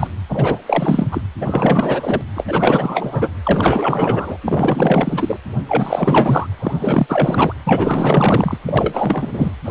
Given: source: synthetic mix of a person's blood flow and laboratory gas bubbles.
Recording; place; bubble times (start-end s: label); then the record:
Doppler ultrasound of blood flow; precordium
0.00-0.07 s: bubbles
0.29-0.59 s: bubbles
0.66-1.07 s: bubbles
1.11-1.21 s: bubbles
1.41-2.21 s: bubbles
2.35-2.44 s: bubbles
2.47-3.30 s: bubbles
3.43-4.37 s: bubbles
4.44-5.37 s: bubbles
5.68-6.47 s: bubbles
6.59-7.53 s: bubbles
7.65-8.58 s: bubbles
8.66-9.52 s: bubbles
9.64-9.71 s: bubbles
From the record:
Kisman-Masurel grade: 444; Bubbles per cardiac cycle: continuous sound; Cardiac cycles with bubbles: 100%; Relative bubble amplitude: maximal (0.775 to 0.999); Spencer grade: 4 (maximum detectable bubble signal sounding continuously throughout systole and diastole of every cardiac period, and overriding the amplitude of the normal cardiac signals); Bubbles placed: anywhere in the cardiac cycle